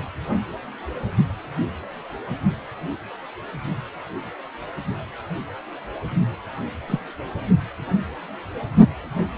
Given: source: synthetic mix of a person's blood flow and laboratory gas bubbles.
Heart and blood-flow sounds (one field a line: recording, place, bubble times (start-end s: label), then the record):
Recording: Doppler ultrasound of blood flow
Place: precordium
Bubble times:
6.87-7.00 s: bubbles
From the record:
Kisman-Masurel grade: 112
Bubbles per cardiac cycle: 1 to 2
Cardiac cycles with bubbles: 1 to 10%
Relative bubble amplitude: moderate (0.250 to 0.450)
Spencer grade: 1 (occasional bubble signal discernible with the cardiac motion signal, with majority of cardiac periods free of bubbles)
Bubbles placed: anywhere in the cardiac cycle